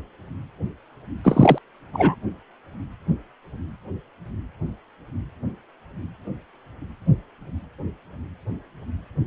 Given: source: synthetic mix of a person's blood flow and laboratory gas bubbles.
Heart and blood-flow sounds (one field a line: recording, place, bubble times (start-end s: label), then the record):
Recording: Doppler ultrasound of blood flow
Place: precordium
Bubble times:
1.24-1.58 s: bubbles
1.93-2.16 s: bubbles
From the record:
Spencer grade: 1 (occasional bubble signal discernible with the cardiac motion signal, with majority of cardiac periods free of bubbles)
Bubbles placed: anywhere in the cardiac cycle